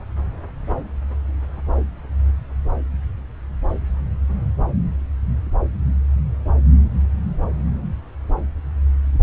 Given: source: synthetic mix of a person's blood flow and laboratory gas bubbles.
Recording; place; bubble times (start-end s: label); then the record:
Doppler ultrasound of blood flow; subclavian vein
no bubbles
From the record:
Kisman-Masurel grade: 000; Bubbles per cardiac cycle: 0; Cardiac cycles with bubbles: 0%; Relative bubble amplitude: no bubbles discernible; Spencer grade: 0 (complete lack of bubble signals)